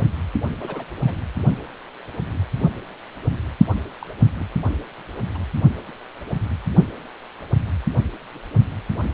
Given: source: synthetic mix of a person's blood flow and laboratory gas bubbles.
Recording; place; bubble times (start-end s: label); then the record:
Doppler ultrasound of blood flow; precordium
0.60-0.84 s: bubbles
1.02-1.14 s: bubbles
4.00-4.06 s: bubbles
4.38-4.46 s: bubbles
5.34-5.38 s: bubbles
5.88-5.92 s: bubbles
From the record:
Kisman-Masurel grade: 121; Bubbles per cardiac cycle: 1 to 2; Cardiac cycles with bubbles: 10 to 50%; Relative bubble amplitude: barely perceptible (0.100 to 0.250); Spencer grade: 2 (many but less than half of the cardiac periods contain bubble signals, singularly or in groups); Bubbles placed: only in the low amplitude regions of the cardiac cycle